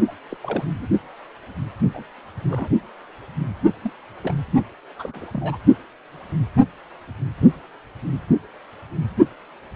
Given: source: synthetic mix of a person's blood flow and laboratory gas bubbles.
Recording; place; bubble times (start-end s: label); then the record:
Doppler ultrasound of blood flow; precordium
0.07-0.12 s: bubbles
0.29-0.37 s: bubbles
0.42-0.65 s: bubbles
0.77-0.88 s: bubbles
1.94-2.03 s: bubbles
2.47-2.69 s: bubbles
3.82-3.92 s: bubbles
4.23-4.34 s: bubbles
4.98-5.25 s: bubbles
5.33-5.58 s: bubbles
From the record:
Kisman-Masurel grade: 221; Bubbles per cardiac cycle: several, 3 to 8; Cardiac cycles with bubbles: 10 to 50%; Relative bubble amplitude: barely perceptible (0.100 to 0.250); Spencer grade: 2 (many but less than half of the cardiac periods contain bubble signals, singularly or in groups); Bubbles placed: only in the low amplitude regions of the cardiac cycle